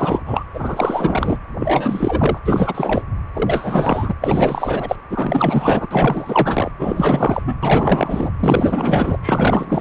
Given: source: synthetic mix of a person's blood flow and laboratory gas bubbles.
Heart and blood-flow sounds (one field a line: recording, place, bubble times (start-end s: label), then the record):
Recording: Doppler ultrasound of blood flow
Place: precordium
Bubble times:
0.00-0.20 s: bubbles
0.26-0.44 s: bubbles
0.54-1.38 s: bubbles
1.59-2.38 s: bubbles
2.46-3.02 s: bubbles
3.33-4.15 s: bubbles
4.22-4.96 s: bubbles
5.09-5.87 s: bubbles
5.91-6.71 s: bubbles
6.79-7.42 s: bubbles
7.46-7.56 s: bubbles
7.62-8.31 s: bubbles
8.39-9.17 s: bubbles
9.21-9.81 s: bubbles
From the record:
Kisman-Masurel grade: 444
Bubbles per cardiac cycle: continuous sound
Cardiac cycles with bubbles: 100%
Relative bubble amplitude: maximal (0.775 to 0.999)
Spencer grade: 4 (maximum detectable bubble signal sounding continuously throughout systole and diastole of every cardiac period, and overriding the amplitude of the normal cardiac signals)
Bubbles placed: anywhere in the cardiac cycle